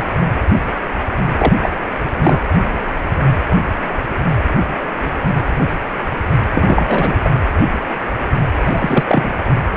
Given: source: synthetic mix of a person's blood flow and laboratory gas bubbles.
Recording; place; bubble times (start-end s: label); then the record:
Doppler ultrasound of blood flow; precordium
1.38-1.52 s: bubbles
1.62-1.69 s: bubbles
2.15-2.41 s: bubbles
6.54-7.16 s: bubbles
7.21-7.30 s: bubbles
8.64-9.30 s: bubbles
9.38-9.43 s: bubbles
From the record:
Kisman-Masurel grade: 223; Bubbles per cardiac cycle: several, 3 to 8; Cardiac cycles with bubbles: 10 to 50%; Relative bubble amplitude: loud (0.450 to 0.775); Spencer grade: 2 (many but less than half of the cardiac periods contain bubble signals, singularly or in groups); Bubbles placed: anywhere in the cardiac cycle